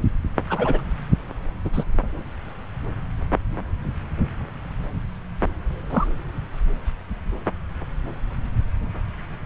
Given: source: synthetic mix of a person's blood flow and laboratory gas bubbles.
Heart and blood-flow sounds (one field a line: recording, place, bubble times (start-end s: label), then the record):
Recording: Doppler ultrasound of blood flow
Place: subclavian vein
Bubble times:
0.49-0.81 s: bubbles
1.65-1.84 s: bubbles
5.90-6.08 s: bubbles
From the record:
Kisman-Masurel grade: 122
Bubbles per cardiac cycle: 1 to 2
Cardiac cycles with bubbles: 10 to 50%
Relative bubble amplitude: moderate (0.250 to 0.450)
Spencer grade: 2 (many but less than half of the cardiac periods contain bubble signals, singularly or in groups)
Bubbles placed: anywhere in the cardiac cycle